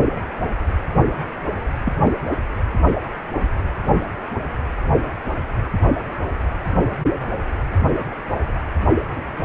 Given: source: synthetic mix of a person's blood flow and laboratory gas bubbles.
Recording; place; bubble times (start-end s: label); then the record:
Doppler ultrasound of blood flow; precordium
1.85-1.92 s: bubbles
2.03-2.11 s: bubbles
From the record:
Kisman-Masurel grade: 112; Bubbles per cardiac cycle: 1 to 2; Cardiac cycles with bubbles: 1 to 10%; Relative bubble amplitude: moderate (0.250 to 0.450); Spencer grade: 1 (occasional bubble signal discernible with the cardiac motion signal, with majority of cardiac periods free of bubbles); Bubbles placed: anywhere in the cardiac cycle